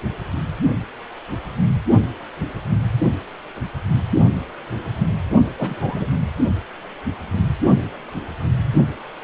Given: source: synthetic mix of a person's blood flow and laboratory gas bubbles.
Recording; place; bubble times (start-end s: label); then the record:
Doppler ultrasound of blood flow; precordium
5.57-6.07 s: bubbles
From the record:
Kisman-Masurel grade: 112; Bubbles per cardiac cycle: 1 to 2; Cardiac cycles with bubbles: 1 to 10%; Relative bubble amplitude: moderate (0.250 to 0.450); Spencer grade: 1 (occasional bubble signal discernible with the cardiac motion signal, with majority of cardiac periods free of bubbles); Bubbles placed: only in the low amplitude regions of the cardiac cycle